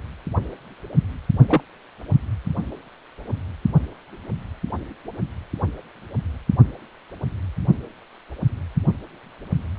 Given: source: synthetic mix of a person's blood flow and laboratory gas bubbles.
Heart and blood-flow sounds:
Doppler ultrasound of blood flow; precordium
1.47-1.61 s: bubbles
From the record:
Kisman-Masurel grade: 113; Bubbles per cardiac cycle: 1 to 2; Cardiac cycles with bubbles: 1 to 10%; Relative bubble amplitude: loud (0.450 to 0.775); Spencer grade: 1 (occasional bubble signal discernible with the cardiac motion signal, with majority of cardiac periods free of bubbles); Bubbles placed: only in the low amplitude regions of the cardiac cycle

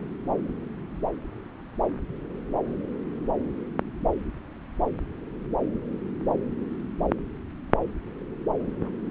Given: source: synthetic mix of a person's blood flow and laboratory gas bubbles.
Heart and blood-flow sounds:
Doppler ultrasound of blood flow; subclavian vein
no bubbles
From the record:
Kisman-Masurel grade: 000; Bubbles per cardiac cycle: 0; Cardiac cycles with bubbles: 0%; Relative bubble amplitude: no bubbles discernible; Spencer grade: 0 (complete lack of bubble signals)

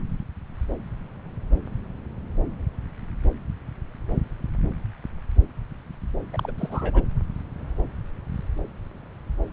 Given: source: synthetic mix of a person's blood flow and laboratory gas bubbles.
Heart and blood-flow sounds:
Doppler ultrasound of blood flow; subclavian vein
6.33-6.52 s: bubbles
6.58-7.03 s: bubbles
From the record:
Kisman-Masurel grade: 211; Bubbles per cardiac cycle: several, 3 to 8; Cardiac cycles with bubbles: 1 to 10%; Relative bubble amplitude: barely perceptible (0.100 to 0.250); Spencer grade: 1 (occasional bubble signal discernible with the cardiac motion signal, with majority of cardiac periods free of bubbles); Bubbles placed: anywhere in the cardiac cycle

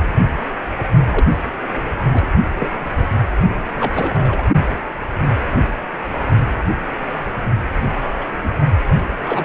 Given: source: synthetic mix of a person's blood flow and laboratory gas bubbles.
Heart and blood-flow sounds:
Doppler ultrasound of blood flow; precordium
1.07-1.27 s: bubbles
1.31-1.37 s: bubbles
1.43-1.50 s: bubbles
1.62-1.67 s: bubbles
2.03-2.28 s: bubbles
2.58-2.71 s: bubbles
2.85-3.05 s: bubbles
3.73-4.42 s: bubbles
7.84-7.91 s: bubbles
8.19-8.25 s: bubbles
8.43-8.49 s: bubbles
9.18-9.45 s: bubbles
From the record:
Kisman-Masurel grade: 232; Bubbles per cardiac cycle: several, 3 to 8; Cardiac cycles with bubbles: 50 to 99%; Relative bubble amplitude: moderate (0.250 to 0.450); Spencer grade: 3 (all of the cardiac periods contain showers or single bubble signals, but not dominating or overriding the cardiac motion signals); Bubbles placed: only in the low amplitude regions of the cardiac cycle

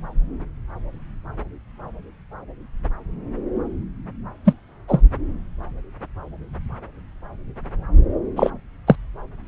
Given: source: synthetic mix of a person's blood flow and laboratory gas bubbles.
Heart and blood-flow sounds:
Doppler ultrasound of blood flow; subclavian vein
4.45-4.53 s: bubbles
4.88-5.03 s: bubbles
8.36-8.50 s: bubbles
8.87-8.96 s: bubbles
From the record:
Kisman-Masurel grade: 113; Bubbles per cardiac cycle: 1 to 2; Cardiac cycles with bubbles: 1 to 10%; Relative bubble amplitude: loud (0.450 to 0.775); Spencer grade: 1 (occasional bubble signal discernible with the cardiac motion signal, with majority of cardiac periods free of bubbles); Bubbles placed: anywhere in the cardiac cycle

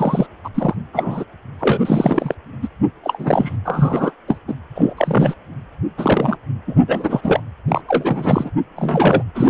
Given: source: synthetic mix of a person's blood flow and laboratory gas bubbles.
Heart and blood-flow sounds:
Doppler ultrasound of blood flow; precordium
0.00-0.26 s: bubbles
0.44-0.48 s: bubbles
0.54-0.75 s: bubbles
0.93-1.24 s: bubbles
1.59-2.35 s: bubbles
2.62-2.67 s: bubbles
3.04-3.57 s: bubbles
3.65-4.11 s: bubbles
4.28-4.38 s: bubbles
4.47-4.54 s: bubbles
4.75-4.94 s: bubbles
4.97-5.35 s: bubbles
5.97-6.37 s: bubbles
6.67-6.75 s: bubbles
6.87-7.21 s: bubbles
7.23-7.41 s: bubbles
7.68-7.82 s: bubbles
7.88-8.50 s: bubbles
8.76-9.23 s: bubbles
9.34-9.50 s: bubbles
From the record:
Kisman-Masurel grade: 243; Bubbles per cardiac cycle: several, 3 to 8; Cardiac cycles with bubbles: 100%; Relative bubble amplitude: loud (0.450 to 0.775); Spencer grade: 3 (all of the cardiac periods contain showers or single bubble signals, but not dominating or overriding the cardiac motion signals); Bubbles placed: anywhere in the cardiac cycle

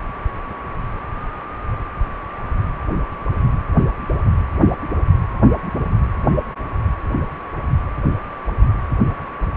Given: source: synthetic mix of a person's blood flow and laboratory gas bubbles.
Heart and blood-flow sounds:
Doppler ultrasound of blood flow; precordium
no bubbles
From the record:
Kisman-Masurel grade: 000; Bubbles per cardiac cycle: 0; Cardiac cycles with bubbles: 0%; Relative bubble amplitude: no bubbles discernible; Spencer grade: 0 (complete lack of bubble signals)

